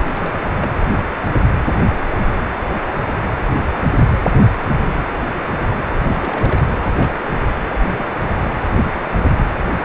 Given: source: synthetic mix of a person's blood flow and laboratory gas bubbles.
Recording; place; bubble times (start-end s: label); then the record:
Doppler ultrasound of blood flow; precordium
0.12-0.46 s: bubbles
0.56-0.71 s: bubbles
6.15-6.62 s: bubbles
6.83-7.15 s: bubbles
7.18-7.44 s: bubbles
7.74-7.95 s: bubbles
7.98-8.05 s: bubbles
8.08-8.27 s: bubbles
8.37-8.40 s: bubbles
8.95-9.43 s: bubbles
9.80-9.85 s: bubbles
From the record:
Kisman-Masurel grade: 221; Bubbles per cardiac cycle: several, 3 to 8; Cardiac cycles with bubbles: 10 to 50%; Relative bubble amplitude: barely perceptible (0.100 to 0.250); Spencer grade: 2 (many but less than half of the cardiac periods contain bubble signals, singularly or in groups); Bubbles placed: anywhere in the cardiac cycle